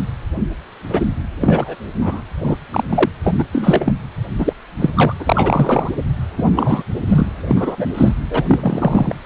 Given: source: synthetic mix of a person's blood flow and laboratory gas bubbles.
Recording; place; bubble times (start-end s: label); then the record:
Doppler ultrasound of blood flow; precordium
0.90-1.07 s: bubbles
1.40-1.75 s: bubbles
2.01-2.21 s: bubbles
2.40-2.57 s: bubbles
2.72-2.83 s: bubbles
2.89-3.09 s: bubbles
3.24-3.44 s: bubbles
3.52-3.94 s: bubbles
4.39-4.53 s: bubbles
4.77-5.14 s: bubbles
5.19-5.91 s: bubbles
6.37-6.83 s: bubbles
7.08-7.27 s: bubbles
7.47-8.12 s: bubbles
8.29-8.43 s: bubbles
8.48-9.15 s: bubbles
9.24-9.26 s: bubbles
From the record:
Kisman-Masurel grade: 243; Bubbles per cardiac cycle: several, 3 to 8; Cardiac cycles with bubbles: 100%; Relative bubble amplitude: loud (0.450 to 0.775); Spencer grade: 3 (all of the cardiac periods contain showers or single bubble signals, but not dominating or overriding the cardiac motion signals); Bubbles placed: anywhere in the cardiac cycle